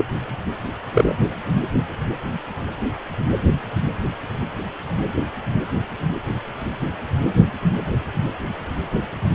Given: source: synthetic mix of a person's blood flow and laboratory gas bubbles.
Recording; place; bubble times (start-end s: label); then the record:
Doppler ultrasound of blood flow; precordium
0.00-0.05 s: bubbles
0.94-1.15 s: bubbles
From the record:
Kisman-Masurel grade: 123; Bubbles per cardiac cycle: 1 to 2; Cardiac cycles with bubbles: 10 to 50%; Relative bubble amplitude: loud (0.450 to 0.775); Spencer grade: 2 (many but less than half of the cardiac periods contain bubble signals, singularly or in groups); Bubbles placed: anywhere in the cardiac cycle